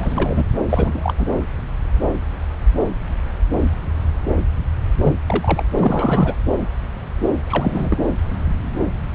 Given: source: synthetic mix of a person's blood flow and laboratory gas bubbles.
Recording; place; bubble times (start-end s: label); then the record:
Doppler ultrasound of blood flow; subclavian vein
0.00-0.44 s: bubbles
0.69-1.14 s: bubbles
1.17-1.27 s: bubbles
5.04-5.15 s: bubbles
5.27-5.65 s: bubbles
5.79-6.34 s: bubbles
7.47-7.98 s: bubbles
From the record:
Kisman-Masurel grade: 232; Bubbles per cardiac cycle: several, 3 to 8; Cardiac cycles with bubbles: 50 to 99%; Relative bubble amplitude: moderate (0.250 to 0.450); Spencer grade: 3 (all of the cardiac periods contain showers or single bubble signals, but not dominating or overriding the cardiac motion signals); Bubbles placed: anywhere in the cardiac cycle